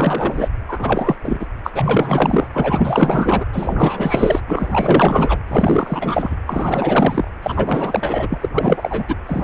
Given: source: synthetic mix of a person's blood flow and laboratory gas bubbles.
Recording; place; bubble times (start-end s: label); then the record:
Doppler ultrasound of blood flow; precordium
0.00-0.49 s: bubbles
0.68-1.15 s: bubbles
1.23-1.46 s: bubbles
1.64-1.71 s: bubbles
1.75-2.47 s: bubbles
2.52-3.46 s: bubbles
3.52-4.41 s: bubbles
4.48-5.37 s: bubbles
5.48-6.36 s: bubbles
6.49-7.31 s: bubbles
7.43-8.38 s: bubbles
8.41-8.50 s: bubbles
8.54-9.16 s: bubbles
9.26-9.44 s: bubbles
From the record:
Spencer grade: 4 (maximum detectable bubble signal sounding continuously throughout systole and diastole of every cardiac period, and overriding the amplitude of the normal cardiac signals); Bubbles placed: anywhere in the cardiac cycle